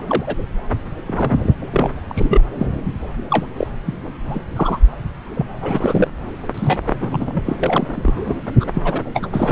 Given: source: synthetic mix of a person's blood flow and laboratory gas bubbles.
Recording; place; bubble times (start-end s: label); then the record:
Doppler ultrasound of blood flow; subclavian vein
0.07-0.34 s: bubbles
1.06-1.55 s: bubbles
1.72-1.90 s: bubbles
2.09-2.42 s: bubbles
2.58-2.67 s: bubbles
3.29-3.46 s: bubbles
3.57-3.67 s: bubbles
3.86-3.95 s: bubbles
4.30-4.39 s: bubbles
4.56-4.79 s: bubbles
5.35-5.46 s: bubbles
5.61-6.08 s: bubbles
6.54-6.78 s: bubbles
6.84-6.91 s: bubbles
7.00-7.42 s: bubbles
7.46-7.56 s: bubbles
7.63-8.13 s: bubbles
8.25-8.37 s: bubbles
8.60-8.65 s: bubbles
8.74-9.02 s: bubbles
9.14-9.27 s: bubbles
9.32-9.52 s: bubbles
From the record:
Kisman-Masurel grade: 242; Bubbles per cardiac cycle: several, 3 to 8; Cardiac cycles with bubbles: 100%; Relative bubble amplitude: moderate (0.250 to 0.450); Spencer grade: 3 (all of the cardiac periods contain showers or single bubble signals, but not dominating or overriding the cardiac motion signals); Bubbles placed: anywhere in the cardiac cycle